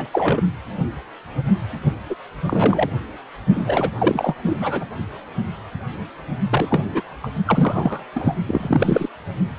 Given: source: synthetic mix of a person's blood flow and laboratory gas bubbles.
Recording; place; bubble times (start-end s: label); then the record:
Doppler ultrasound of blood flow; precordium
0.00-0.09 s: bubbles
0.12-0.42 s: bubbles
2.10-2.16 s: bubbles
2.47-2.90 s: bubbles
3.54-3.91 s: bubbles
3.98-4.34 s: bubbles
4.49-4.57 s: bubbles
4.59-4.84 s: bubbles
6.50-7.02 s: bubbles
7.23-7.29 s: bubbles
7.46-8.04 s: bubbles
8.15-8.34 s: bubbles
8.46-9.07 s: bubbles
From the record:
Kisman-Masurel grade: 232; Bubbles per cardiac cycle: several, 3 to 8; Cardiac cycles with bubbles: 50 to 99%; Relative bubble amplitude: moderate (0.250 to 0.450); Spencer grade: 3 (all of the cardiac periods contain showers or single bubble signals, but not dominating or overriding the cardiac motion signals); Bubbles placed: only in the low amplitude regions of the cardiac cycle